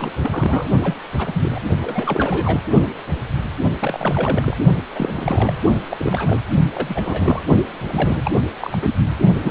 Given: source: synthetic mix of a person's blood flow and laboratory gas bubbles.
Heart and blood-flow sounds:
Doppler ultrasound of blood flow; precordium
0.00-0.10 s: bubbles
0.22-0.69 s: bubbles
0.83-0.94 s: bubbles
1.17-1.60 s: bubbles
1.81-2.60 s: bubbles
3.79-4.57 s: bubbles
4.95-5.55 s: bubbles
5.88-6.43 s: bubbles
6.73-7.41 s: bubbles
7.83-8.20 s: bubbles
8.24-8.31 s: bubbles
8.60-8.79 s: bubbles
8.81-8.90 s: bubbles
9.35-9.51 s: bubbles
From the record:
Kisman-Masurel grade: 332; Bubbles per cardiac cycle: rolling drumbeat, 9 or more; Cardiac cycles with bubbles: 50 to 99%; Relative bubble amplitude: moderate (0.250 to 0.450); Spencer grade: 3 (all of the cardiac periods contain showers or single bubble signals, but not dominating or overriding the cardiac motion signals); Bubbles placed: only in the low amplitude regions of the cardiac cycle

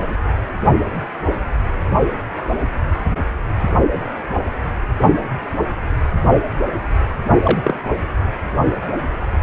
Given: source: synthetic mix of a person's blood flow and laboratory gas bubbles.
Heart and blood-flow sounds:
Doppler ultrasound of blood flow; precordium
7.43-7.79 s: bubbles
From the record:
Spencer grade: 1 (occasional bubble signal discernible with the cardiac motion signal, with majority of cardiac periods free of bubbles); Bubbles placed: only in the low amplitude regions of the cardiac cycle

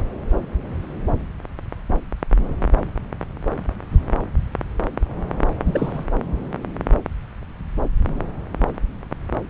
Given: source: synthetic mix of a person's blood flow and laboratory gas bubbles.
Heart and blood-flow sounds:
Doppler ultrasound of blood flow; subclavian vein
5.64-6.04 s: bubbles
From the record:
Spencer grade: 1 (occasional bubble signal discernible with the cardiac motion signal, with majority of cardiac periods free of bubbles); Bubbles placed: anywhere in the cardiac cycle

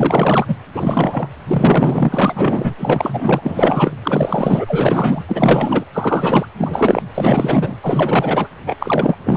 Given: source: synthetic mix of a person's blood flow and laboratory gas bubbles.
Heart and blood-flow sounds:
Doppler ultrasound of blood flow; precordium
0.00-0.55 s: bubbles
0.74-1.27 s: bubbles
1.48-2.75 s: bubbles
2.77-3.96 s: bubbles
4.03-5.23 s: bubbles
5.28-5.84 s: bubbles
5.92-6.46 s: bubbles
6.58-7.03 s: bubbles
7.14-7.76 s: bubbles
7.82-8.47 s: bubbles
8.66-9.15 s: bubbles
9.23-9.36 s: bubbles
From the record:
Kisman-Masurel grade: 444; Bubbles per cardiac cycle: continuous sound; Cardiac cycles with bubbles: 100%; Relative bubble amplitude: maximal (0.775 to 0.999); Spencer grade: 4 (maximum detectable bubble signal sounding continuously throughout systole and diastole of every cardiac period, and overriding the amplitude of the normal cardiac signals); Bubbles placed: anywhere in the cardiac cycle

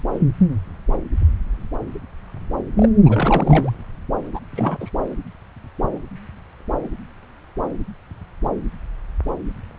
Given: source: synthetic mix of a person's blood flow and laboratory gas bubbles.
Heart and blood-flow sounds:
Doppler ultrasound of blood flow; subclavian vein
0.00-0.03 s: bubbles
0.14-0.19 s: bubbles
2.77-2.89 s: bubbles
3.04-3.73 s: bubbles
4.33-4.40 s: bubbles
4.54-4.78 s: bubbles
4.80-4.90 s: bubbles
From the record:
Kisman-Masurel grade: 222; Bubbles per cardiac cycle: several, 3 to 8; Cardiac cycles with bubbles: 10 to 50%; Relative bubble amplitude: moderate (0.250 to 0.450); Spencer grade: 2 (many but less than half of the cardiac periods contain bubble signals, singularly or in groups); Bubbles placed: anywhere in the cardiac cycle

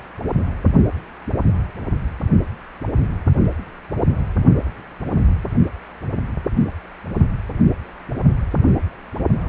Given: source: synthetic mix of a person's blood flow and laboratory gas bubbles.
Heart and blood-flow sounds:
Doppler ultrasound of blood flow; precordium
9.40-9.49 s: bubbles
From the record:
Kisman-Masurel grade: 221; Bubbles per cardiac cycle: several, 3 to 8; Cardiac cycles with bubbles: 10 to 50%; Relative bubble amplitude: barely perceptible (0.100 to 0.250); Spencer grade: 2 (many but less than half of the cardiac periods contain bubble signals, singularly or in groups); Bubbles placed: only in the low amplitude regions of the cardiac cycle

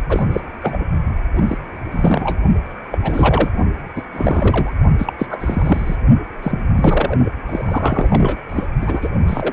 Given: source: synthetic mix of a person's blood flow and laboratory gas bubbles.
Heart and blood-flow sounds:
Doppler ultrasound of blood flow; precordium
0.09-0.23 s: bubbles
0.29-0.40 s: bubbles
0.60-0.88 s: bubbles
1.35-1.58 s: bubbles
1.91-2.38 s: bubbles
2.91-2.98 s: bubbles
3.02-3.50 s: bubbles
3.96-4.03 s: bubbles
4.12-4.72 s: bubbles
4.98-5.13 s: bubbles
5.18-5.26 s: bubbles
5.29-5.96 s: bubbles
6.42-6.72 s: bubbles
6.75-7.32 s: bubbles
7.47-8.36 s: bubbles
8.49-8.66 s: bubbles
8.81-9.08 s: bubbles
9.27-9.53 s: bubbles
From the record:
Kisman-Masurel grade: 342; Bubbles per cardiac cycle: rolling drumbeat, 9 or more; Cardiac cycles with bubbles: 100%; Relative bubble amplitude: moderate (0.250 to 0.450); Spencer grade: 3 (all of the cardiac periods contain showers or single bubble signals, but not dominating or overriding the cardiac motion signals); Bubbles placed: only in the low amplitude regions of the cardiac cycle

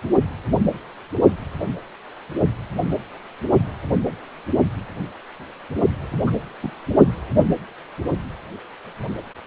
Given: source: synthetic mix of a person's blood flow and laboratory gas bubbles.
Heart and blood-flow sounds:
Doppler ultrasound of blood flow; precordium
6.26-6.31 s: bubbles
6.62-6.71 s: bubbles
From the record:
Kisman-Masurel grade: 112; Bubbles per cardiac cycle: 1 to 2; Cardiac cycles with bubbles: 1 to 10%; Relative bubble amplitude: moderate (0.250 to 0.450); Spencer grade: 1 (occasional bubble signal discernible with the cardiac motion signal, with majority of cardiac periods free of bubbles); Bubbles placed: only in the low amplitude regions of the cardiac cycle

